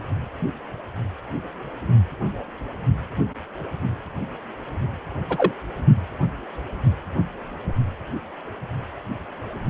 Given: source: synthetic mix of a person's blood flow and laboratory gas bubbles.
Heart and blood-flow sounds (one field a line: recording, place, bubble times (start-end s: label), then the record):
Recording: Doppler ultrasound of blood flow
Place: precordium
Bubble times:
5.29-5.51 s: bubbles
From the record:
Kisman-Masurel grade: 112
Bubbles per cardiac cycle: 1 to 2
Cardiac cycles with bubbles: 1 to 10%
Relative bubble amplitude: moderate (0.250 to 0.450)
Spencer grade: 1 (occasional bubble signal discernible with the cardiac motion signal, with majority of cardiac periods free of bubbles)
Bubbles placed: anywhere in the cardiac cycle